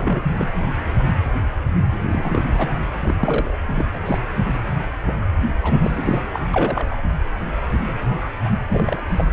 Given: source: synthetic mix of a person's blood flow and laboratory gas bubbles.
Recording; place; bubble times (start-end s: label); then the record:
Doppler ultrasound of blood flow; precordium
0.00-0.49 s: bubbles
2.12-2.43 s: bubbles
2.58-2.72 s: bubbles
2.93-3.15 s: bubbles
3.23-3.56 s: bubbles
3.76-3.86 s: bubbles
3.93-4.00 s: bubbles
4.05-4.18 s: bubbles
4.58-4.61 s: bubbles
5.06-5.13 s: bubbles
5.21-5.25 s: bubbles
5.62-6.21 s: bubbles
6.32-6.40 s: bubbles
6.54-6.97 s: bubbles
8.70-9.02 s: bubbles
9.08-9.24 s: bubbles
From the record:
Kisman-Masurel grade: 232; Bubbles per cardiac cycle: several, 3 to 8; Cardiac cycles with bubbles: 50 to 99%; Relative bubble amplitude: moderate (0.250 to 0.450); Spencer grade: 3 (all of the cardiac periods contain showers or single bubble signals, but not dominating or overriding the cardiac motion signals); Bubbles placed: anywhere in the cardiac cycle